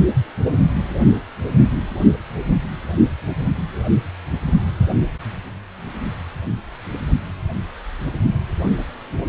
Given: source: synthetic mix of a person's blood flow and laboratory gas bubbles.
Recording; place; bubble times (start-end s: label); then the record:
Doppler ultrasound of blood flow; precordium
no bubbles
From the record:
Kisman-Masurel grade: 000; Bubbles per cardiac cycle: 0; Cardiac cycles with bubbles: 0%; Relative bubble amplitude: no bubbles discernible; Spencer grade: 0 (complete lack of bubble signals)